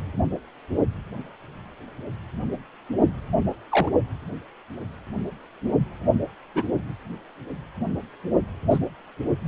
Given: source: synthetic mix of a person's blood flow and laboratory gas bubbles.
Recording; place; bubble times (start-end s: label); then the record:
Doppler ultrasound of blood flow; precordium
3.69-3.90 s: bubbles
6.55-6.64 s: bubbles
8.70-8.79 s: bubbles
From the record:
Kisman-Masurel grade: 122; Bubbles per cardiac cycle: 1 to 2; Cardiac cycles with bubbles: 10 to 50%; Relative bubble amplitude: moderate (0.250 to 0.450); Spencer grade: 2 (many but less than half of the cardiac periods contain bubble signals, singularly or in groups); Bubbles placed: only in the low amplitude regions of the cardiac cycle